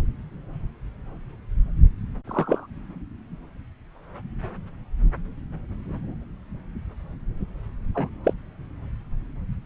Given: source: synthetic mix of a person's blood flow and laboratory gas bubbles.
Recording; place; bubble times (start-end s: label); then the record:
Doppler ultrasound of blood flow; subclavian vein
2.27-2.67 s: bubbles
7.94-8.09 s: bubbles
8.24-8.33 s: bubbles
From the record:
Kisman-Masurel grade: 112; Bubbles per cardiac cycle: 1 to 2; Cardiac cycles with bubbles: 1 to 10%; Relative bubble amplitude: moderate (0.250 to 0.450); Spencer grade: 1 (occasional bubble signal discernible with the cardiac motion signal, with majority of cardiac periods free of bubbles); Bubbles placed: anywhere in the cardiac cycle